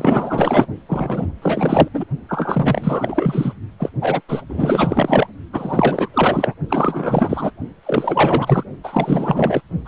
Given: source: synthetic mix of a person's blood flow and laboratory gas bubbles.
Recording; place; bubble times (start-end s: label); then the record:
Doppler ultrasound of blood flow; precordium
0.00-0.67 s: bubbles
0.89-1.26 s: bubbles
1.41-1.89 s: bubbles
1.93-2.04 s: bubbles
2.29-3.54 s: bubbles
3.79-3.90 s: bubbles
4.02-4.21 s: bubbles
4.29-4.42 s: bubbles
4.49-5.27 s: bubbles
5.53-6.08 s: bubbles
6.13-6.54 s: bubbles
6.69-7.51 s: bubbles
7.83-8.63 s: bubbles
8.84-9.62 s: bubbles
9.85-9.88 s: bubbles
From the record:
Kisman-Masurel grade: 444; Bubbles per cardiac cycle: continuous sound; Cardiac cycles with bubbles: 100%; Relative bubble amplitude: maximal (0.775 to 0.999); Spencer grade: 4 (maximum detectable bubble signal sounding continuously throughout systole and diastole of every cardiac period, and overriding the amplitude of the normal cardiac signals); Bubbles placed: only in the low amplitude regions of the cardiac cycle